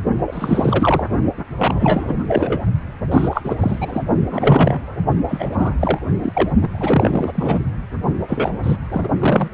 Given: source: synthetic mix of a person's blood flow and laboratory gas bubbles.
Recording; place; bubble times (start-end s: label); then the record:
Doppler ultrasound of blood flow; precordium
0.27-1.05 s: bubbles
1.37-1.44 s: bubbles
1.58-2.14 s: bubbles
2.27-2.61 s: bubbles
3.11-3.56 s: bubbles
3.58-4.03 s: bubbles
4.30-4.97 s: bubbles
5.28-5.75 s: bubbles
5.79-5.99 s: bubbles
6.22-6.50 s: bubbles
6.61-7.63 s: bubbles
8.28-8.53 s: bubbles
8.64-8.76 s: bubbles
8.91-9.09 s: bubbles
9.20-9.49 s: bubbles
From the record:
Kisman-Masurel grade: 343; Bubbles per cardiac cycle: rolling drumbeat, 9 or more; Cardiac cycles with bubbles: 100%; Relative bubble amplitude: loud (0.450 to 0.775); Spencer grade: 3 (all of the cardiac periods contain showers or single bubble signals, but not dominating or overriding the cardiac motion signals); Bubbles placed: only in the low amplitude regions of the cardiac cycle